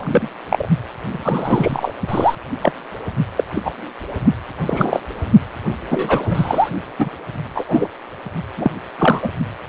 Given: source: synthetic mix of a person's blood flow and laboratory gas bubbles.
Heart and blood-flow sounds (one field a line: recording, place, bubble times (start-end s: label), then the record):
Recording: Doppler ultrasound of blood flow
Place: precordium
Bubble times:
0.00-0.28 s: bubbles
0.49-0.69 s: bubbles
1.09-1.92 s: bubbles
2.08-2.35 s: bubbles
2.61-2.72 s: bubbles
3.37-3.44 s: bubbles
3.54-3.62 s: bubbles
3.65-3.71 s: bubbles
4.61-5.00 s: bubbles
5.89-6.69 s: bubbles
6.99-7.09 s: bubbles
7.55-7.64 s: bubbles
7.68-7.88 s: bubbles
8.57-8.71 s: bubbles
8.98-9.29 s: bubbles
From the record:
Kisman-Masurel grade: 243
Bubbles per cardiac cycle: several, 3 to 8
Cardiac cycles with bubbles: 100%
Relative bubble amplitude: loud (0.450 to 0.775)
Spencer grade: 3 (all of the cardiac periods contain showers or single bubble signals, but not dominating or overriding the cardiac motion signals)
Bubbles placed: only in the low amplitude regions of the cardiac cycle